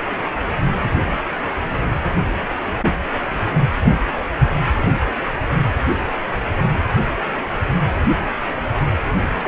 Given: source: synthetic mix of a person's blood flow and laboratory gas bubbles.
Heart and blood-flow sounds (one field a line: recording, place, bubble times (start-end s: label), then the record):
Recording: Doppler ultrasound of blood flow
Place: precordium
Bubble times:
9.42-9.48 s: bubbles
From the record:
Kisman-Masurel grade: 212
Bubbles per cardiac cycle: several, 3 to 8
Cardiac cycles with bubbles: 1 to 10%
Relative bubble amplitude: moderate (0.250 to 0.450)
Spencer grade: 1 (occasional bubble signal discernible with the cardiac motion signal, with majority of cardiac periods free of bubbles)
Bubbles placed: anywhere in the cardiac cycle